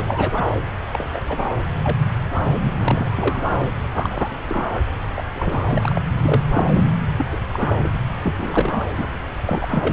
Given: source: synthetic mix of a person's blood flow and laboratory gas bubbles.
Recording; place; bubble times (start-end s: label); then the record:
Doppler ultrasound of blood flow; subclavian vein
0.00-0.44 s: bubbles
0.93-1.07 s: bubbles
1.13-1.21 s: bubbles
1.28-1.39 s: bubbles
1.83-1.96 s: bubbles
2.60-2.71 s: bubbles
2.77-3.11 s: bubbles
3.15-3.72 s: bubbles
3.92-4.29 s: bubbles
4.49-4.80 s: bubbles
5.16-5.24 s: bubbles
5.34-5.65 s: bubbles
5.69-6.01 s: bubbles
6.17-6.42 s: bubbles
6.50-6.89 s: bubbles
7.17-7.26 s: bubbles
7.32-7.38 s: bubbles
7.53-7.99 s: bubbles
8.24-8.89 s: bubbles
8.98-9.05 s: bubbles
9.46-9.93 s: bubbles
From the record:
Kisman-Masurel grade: 242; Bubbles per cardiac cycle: several, 3 to 8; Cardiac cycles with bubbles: 100%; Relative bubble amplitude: moderate (0.250 to 0.450); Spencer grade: 3 (all of the cardiac periods contain showers or single bubble signals, but not dominating or overriding the cardiac motion signals); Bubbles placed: anywhere in the cardiac cycle